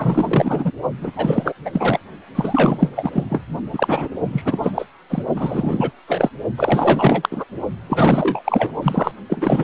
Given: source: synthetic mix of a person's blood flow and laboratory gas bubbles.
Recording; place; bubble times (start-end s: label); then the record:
Doppler ultrasound of blood flow; precordium
0.00-0.71 s: bubbles
1.01-1.11 s: bubbles
1.16-1.53 s: bubbles
1.64-1.99 s: bubbles
2.35-2.90 s: bubbles
2.95-3.24 s: bubbles
3.29-3.44 s: bubbles
3.73-4.08 s: bubbles
4.32-4.85 s: bubbles
5.09-5.22 s: bubbles
5.35-5.91 s: bubbles
6.07-6.29 s: bubbles
6.57-7.44 s: bubbles
7.89-8.74 s: bubbles
8.82-9.12 s: bubbles
9.29-9.64 s: bubbles
From the record:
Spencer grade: 4 (maximum detectable bubble signal sounding continuously throughout systole and diastole of every cardiac period, and overriding the amplitude of the normal cardiac signals); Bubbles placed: only in the low amplitude regions of the cardiac cycle